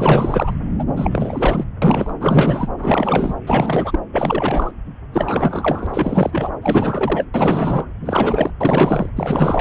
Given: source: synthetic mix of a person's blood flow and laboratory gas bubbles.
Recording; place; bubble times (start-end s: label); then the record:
Doppler ultrasound of blood flow; subclavian vein
0.00-0.54 s: bubbles
0.79-0.84 s: bubbles
0.96-1.64 s: bubbles
1.81-2.13 s: bubbles
2.19-2.68 s: bubbles
2.77-3.36 s: bubbles
3.46-3.99 s: bubbles
4.12-4.71 s: bubbles
5.12-6.50 s: bubbles
6.62-7.26 s: bubbles
7.34-7.92 s: bubbles
8.01-8.53 s: bubbles
8.60-9.10 s: bubbles
9.16-9.61 s: bubbles
From the record:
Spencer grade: 4 (maximum detectable bubble signal sounding continuously throughout systole and diastole of every cardiac period, and overriding the amplitude of the normal cardiac signals); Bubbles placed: anywhere in the cardiac cycle